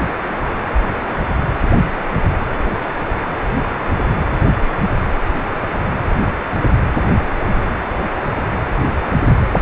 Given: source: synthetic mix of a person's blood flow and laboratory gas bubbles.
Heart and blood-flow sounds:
Doppler ultrasound of blood flow; precordium
no bubbles
From the record:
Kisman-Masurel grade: 000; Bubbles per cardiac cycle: 0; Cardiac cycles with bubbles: 0%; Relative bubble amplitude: no bubbles discernible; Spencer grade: 0 (complete lack of bubble signals)

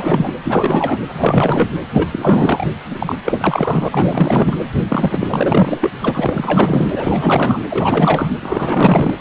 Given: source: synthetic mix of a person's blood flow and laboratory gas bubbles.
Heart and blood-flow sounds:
Doppler ultrasound of blood flow; precordium
0.00-0.32 s: bubbles
0.44-0.99 s: bubbles
1.12-1.70 s: bubbles
1.92-2.67 s: bubbles
2.91-3.16 s: bubbles
3.24-3.88 s: bubbles
3.92-4.56 s: bubbles
4.89-5.91 s: bubbles
6.02-7.62 s: bubbles
7.70-8.31 s: bubbles
8.40-9.14 s: bubbles
From the record:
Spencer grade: 4 (maximum detectable bubble signal sounding continuously throughout systole and diastole of every cardiac period, and overriding the amplitude of the normal cardiac signals); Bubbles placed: anywhere in the cardiac cycle

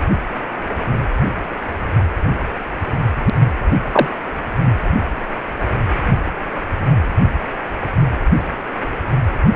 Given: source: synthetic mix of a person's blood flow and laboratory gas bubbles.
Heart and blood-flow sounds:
Doppler ultrasound of blood flow; precordium
3.91-4.07 s: bubbles
4.65-4.73 s: bubbles
From the record:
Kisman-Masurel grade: 113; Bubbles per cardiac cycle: 1 to 2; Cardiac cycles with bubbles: 1 to 10%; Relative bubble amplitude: loud (0.450 to 0.775); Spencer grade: 1 (occasional bubble signal discernible with the cardiac motion signal, with majority of cardiac periods free of bubbles); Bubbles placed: anywhere in the cardiac cycle

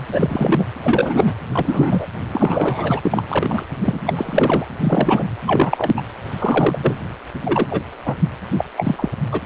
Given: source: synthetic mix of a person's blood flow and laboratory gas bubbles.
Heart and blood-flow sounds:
Doppler ultrasound of blood flow; precordium
0.11-0.65 s: bubbles
0.81-1.37 s: bubbles
1.51-2.07 s: bubbles
2.33-3.00 s: bubbles
3.03-3.24 s: bubbles
3.28-3.63 s: bubbles
3.82-4.01 s: bubbles
4.06-4.13 s: bubbles
4.16-4.65 s: bubbles
4.83-5.24 s: bubbles
5.46-5.92 s: bubbles
5.96-6.02 s: bubbles
6.38-6.99 s: bubbles
7.44-7.81 s: bubbles
8.05-8.14 s: bubbles
8.57-8.64 s: bubbles
8.77-9.09 s: bubbles
9.31-9.42 s: bubbles
From the record:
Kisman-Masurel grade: 243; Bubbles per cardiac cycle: several, 3 to 8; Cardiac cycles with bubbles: 100%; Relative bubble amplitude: loud (0.450 to 0.775); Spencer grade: 3 (all of the cardiac periods contain showers or single bubble signals, but not dominating or overriding the cardiac motion signals); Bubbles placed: anywhere in the cardiac cycle

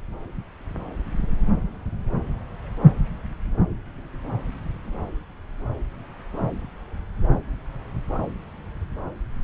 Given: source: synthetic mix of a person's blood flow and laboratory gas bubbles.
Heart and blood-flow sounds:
Doppler ultrasound of blood flow; subclavian vein
no bubbles
From the record:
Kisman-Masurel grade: 000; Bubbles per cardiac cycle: 0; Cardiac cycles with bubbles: 0%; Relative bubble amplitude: no bubbles discernible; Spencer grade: 0 (complete lack of bubble signals)

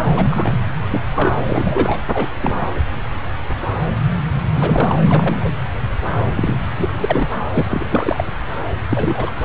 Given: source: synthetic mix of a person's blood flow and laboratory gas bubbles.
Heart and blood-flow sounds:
Doppler ultrasound of blood flow; subclavian vein
0.15-0.57 s: bubbles
0.90-1.03 s: bubbles
1.16-1.31 s: bubbles
1.46-1.98 s: bubbles
2.12-2.28 s: bubbles
2.42-2.65 s: bubbles
4.54-4.99 s: bubbles
5.10-5.51 s: bubbles
6.18-6.25 s: bubbles
6.28-6.59 s: bubbles
6.76-7.35 s: bubbles
7.54-7.86 s: bubbles
7.90-8.24 s: bubbles
8.89-9.31 s: bubbles
9.33-9.45 s: bubbles
From the record:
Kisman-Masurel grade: 232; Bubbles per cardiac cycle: several, 3 to 8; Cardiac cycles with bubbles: 50 to 99%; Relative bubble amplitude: moderate (0.250 to 0.450); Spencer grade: 3 (all of the cardiac periods contain showers or single bubble signals, but not dominating or overriding the cardiac motion signals); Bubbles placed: anywhere in the cardiac cycle

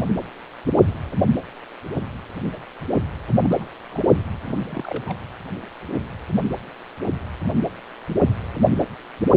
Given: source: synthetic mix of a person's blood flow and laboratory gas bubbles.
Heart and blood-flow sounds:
Doppler ultrasound of blood flow; precordium
3.43-3.66 s: bubbles
3.91-4.24 s: bubbles
4.41-5.18 s: bubbles
From the record:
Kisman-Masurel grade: 221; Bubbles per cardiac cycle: several, 3 to 8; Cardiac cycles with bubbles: 10 to 50%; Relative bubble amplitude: barely perceptible (0.100 to 0.250); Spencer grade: 2 (many but less than half of the cardiac periods contain bubble signals, singularly or in groups); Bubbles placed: anywhere in the cardiac cycle

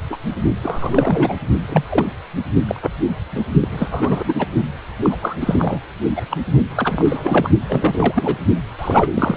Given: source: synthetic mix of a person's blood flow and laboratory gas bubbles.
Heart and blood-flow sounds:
Doppler ultrasound of blood flow; precordium
0.10-0.16 s: bubbles
0.62-1.36 s: bubbles
1.69-1.84 s: bubbles
1.90-2.06 s: bubbles
2.68-2.90 s: bubbles
3.31-3.45 s: bubbles
3.60-3.68 s: bubbles
3.71-3.88 s: bubbles
3.91-4.33 s: bubbles
4.38-4.46 s: bubbles
5.00-5.18 s: bubbles
5.22-5.37 s: bubbles
5.40-5.80 s: bubbles
6.16-6.21 s: bubbles
6.29-6.38 s: bubbles
6.75-7.48 s: bubbles
7.68-8.37 s: bubbles
8.79-9.37 s: bubbles
From the record:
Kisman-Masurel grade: 342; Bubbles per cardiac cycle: rolling drumbeat, 9 or more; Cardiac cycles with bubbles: 100%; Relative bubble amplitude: moderate (0.250 to 0.450); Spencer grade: 3 (all of the cardiac periods contain showers or single bubble signals, but not dominating or overriding the cardiac motion signals); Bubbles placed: only in the low amplitude regions of the cardiac cycle

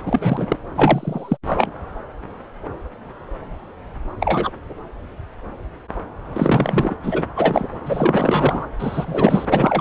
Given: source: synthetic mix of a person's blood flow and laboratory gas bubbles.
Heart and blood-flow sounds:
Doppler ultrasound of blood flow; subclavian vein
0.05-0.56 s: bubbles
0.76-1.37 s: bubbles
1.47-1.71 s: bubbles
4.20-4.50 s: bubbles
6.33-6.95 s: bubbles
7.03-7.23 s: bubbles
7.36-7.67 s: bubbles
7.86-8.68 s: bubbles
8.79-9.81 s: bubbles
From the record:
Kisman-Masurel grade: 233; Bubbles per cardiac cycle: several, 3 to 8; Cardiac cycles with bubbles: 50 to 99%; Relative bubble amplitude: loud (0.450 to 0.775); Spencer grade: 3 (all of the cardiac periods contain showers or single bubble signals, but not dominating or overriding the cardiac motion signals); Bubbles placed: anywhere in the cardiac cycle

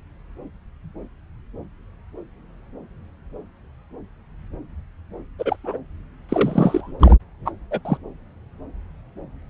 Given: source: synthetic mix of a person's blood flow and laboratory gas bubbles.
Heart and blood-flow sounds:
Doppler ultrasound of blood flow; subclavian vein
5.38-5.56 s: bubbles
5.64-5.78 s: bubbles
6.29-6.93 s: bubbles
7.00-7.16 s: bubbles
7.45-7.51 s: bubbles
7.71-7.80 s: bubbles
7.85-7.98 s: bubbles
From the record:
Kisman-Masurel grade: 222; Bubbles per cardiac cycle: several, 3 to 8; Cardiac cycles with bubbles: 10 to 50%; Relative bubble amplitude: moderate (0.250 to 0.450); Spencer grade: 2 (many but less than half of the cardiac periods contain bubble signals, singularly or in groups); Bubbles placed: anywhere in the cardiac cycle

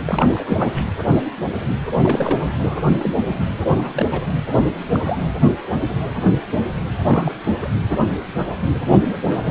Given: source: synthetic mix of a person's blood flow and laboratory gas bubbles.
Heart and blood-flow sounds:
Doppler ultrasound of blood flow; precordium
0.05-0.44 s: bubbles
0.47-0.84 s: bubbles
1.95-2.44 s: bubbles
2.65-2.86 s: bubbles
2.99-3.18 s: bubbles
3.25-3.45 s: bubbles
3.68-4.22 s: bubbles
4.77-5.25 s: bubbles
6.97-7.34 s: bubbles
7.60-7.68 s: bubbles
8.71-8.80 s: bubbles
9.08-9.17 s: bubbles
9.27-9.38 s: bubbles
9.43-9.50 s: bubbles
From the record:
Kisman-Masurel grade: 232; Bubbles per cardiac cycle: several, 3 to 8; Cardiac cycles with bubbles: 50 to 99%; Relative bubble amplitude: moderate (0.250 to 0.450); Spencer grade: 3 (all of the cardiac periods contain showers or single bubble signals, but not dominating or overriding the cardiac motion signals); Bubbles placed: anywhere in the cardiac cycle

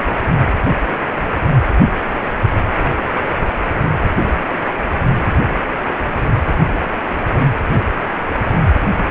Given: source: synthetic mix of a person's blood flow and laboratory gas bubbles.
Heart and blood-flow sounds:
Doppler ultrasound of blood flow; precordium
no bubbles
From the record:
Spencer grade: 0 (complete lack of bubble signals)

